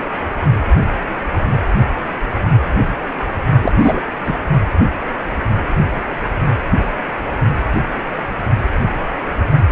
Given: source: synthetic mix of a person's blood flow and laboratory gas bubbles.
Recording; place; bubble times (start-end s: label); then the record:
Doppler ultrasound of blood flow; precordium
3.62-3.72 s: bubbles
3.79-4.00 s: bubbles
4.24-4.36 s: bubbles
From the record:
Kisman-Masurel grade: 213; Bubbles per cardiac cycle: several, 3 to 8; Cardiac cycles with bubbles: 1 to 10%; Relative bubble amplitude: loud (0.450 to 0.775); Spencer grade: 1 (occasional bubble signal discernible with the cardiac motion signal, with majority of cardiac periods free of bubbles); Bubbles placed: only in the low amplitude regions of the cardiac cycle